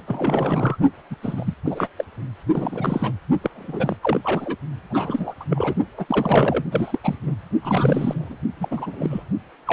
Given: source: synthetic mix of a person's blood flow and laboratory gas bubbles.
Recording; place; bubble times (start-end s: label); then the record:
Doppler ultrasound of blood flow; precordium
0.07-0.77 s: bubbles
1.10-1.16 s: bubbles
1.21-1.54 s: bubbles
1.64-1.88 s: bubbles
1.97-2.04 s: bubbles
2.53-3.12 s: bubbles
3.42-3.97 s: bubbles
4.01-4.21 s: bubbles
4.23-4.56 s: bubbles
4.90-5.33 s: bubbles
5.40-5.44 s: bubbles
5.50-5.75 s: bubbles
5.97-6.05 s: bubbles
6.08-6.64 s: bubbles
6.71-6.98 s: bubbles
7.03-7.15 s: bubbles
7.22-7.35 s: bubbles
7.62-8.37 s: bubbles
8.60-9.23 s: bubbles
9.67-9.73 s: bubbles
From the record:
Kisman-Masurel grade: 343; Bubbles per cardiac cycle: rolling drumbeat, 9 or more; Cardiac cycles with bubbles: 100%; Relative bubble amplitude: loud (0.450 to 0.775); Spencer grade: 3 (all of the cardiac periods contain showers or single bubble signals, but not dominating or overriding the cardiac motion signals); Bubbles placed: only in the low amplitude regions of the cardiac cycle